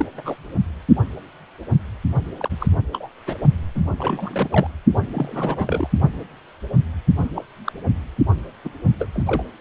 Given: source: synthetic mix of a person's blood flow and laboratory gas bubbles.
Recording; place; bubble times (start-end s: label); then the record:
Doppler ultrasound of blood flow; precordium
0.00-0.07 s: bubbles
0.17-0.35 s: bubbles
2.38-2.67 s: bubbles
2.92-3.09 s: bubbles
3.27-3.35 s: bubbles
3.75-3.81 s: bubbles
3.98-4.68 s: bubbles
5.14-5.88 s: bubbles
7.35-7.44 s: bubbles
7.64-7.72 s: bubbles
8.64-8.70 s: bubbles
9.00-9.09 s: bubbles
9.12-9.23 s: bubbles
9.27-9.43 s: bubbles
From the record:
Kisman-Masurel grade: 232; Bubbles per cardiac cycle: several, 3 to 8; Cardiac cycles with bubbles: 50 to 99%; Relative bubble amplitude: moderate (0.250 to 0.450); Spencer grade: 3 (all of the cardiac periods contain showers or single bubble signals, but not dominating or overriding the cardiac motion signals); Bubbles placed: only in the low amplitude regions of the cardiac cycle